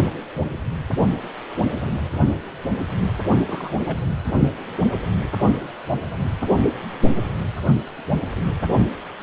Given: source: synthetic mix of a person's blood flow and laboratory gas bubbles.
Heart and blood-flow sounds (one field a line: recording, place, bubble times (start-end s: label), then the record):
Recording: Doppler ultrasound of blood flow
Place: precordium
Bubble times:
3.47-3.72 s: bubbles
3.74-4.00 s: bubbles
From the record:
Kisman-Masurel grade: 211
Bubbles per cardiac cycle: several, 3 to 8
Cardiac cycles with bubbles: 1 to 10%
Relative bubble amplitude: barely perceptible (0.100 to 0.250)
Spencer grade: 1 (occasional bubble signal discernible with the cardiac motion signal, with majority of cardiac periods free of bubbles)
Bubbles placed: only in the low amplitude regions of the cardiac cycle